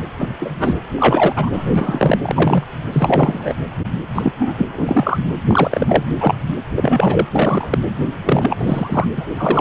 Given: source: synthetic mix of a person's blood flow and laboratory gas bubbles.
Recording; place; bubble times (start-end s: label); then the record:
Doppler ultrasound of blood flow; precordium
0.18-0.28 s: bubbles
0.40-0.80 s: bubbles
0.97-1.49 s: bubbles
1.52-2.18 s: bubbles
2.22-2.64 s: bubbles
2.92-3.54 s: bubbles
4.14-4.33 s: bubbles
4.39-4.54 s: bubbles
4.58-5.19 s: bubbles
5.46-6.04 s: bubbles
6.20-6.41 s: bubbles
6.46-6.54 s: bubbles
6.75-7.27 s: bubbles
7.32-7.78 s: bubbles
8.24-9.06 s: bubbles
9.17-9.25 s: bubbles
9.37-9.61 s: bubbles
From the record:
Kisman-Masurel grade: 243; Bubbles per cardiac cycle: several, 3 to 8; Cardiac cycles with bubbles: 100%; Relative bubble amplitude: loud (0.450 to 0.775); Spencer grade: 3 (all of the cardiac periods contain showers or single bubble signals, but not dominating or overriding the cardiac motion signals); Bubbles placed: anywhere in the cardiac cycle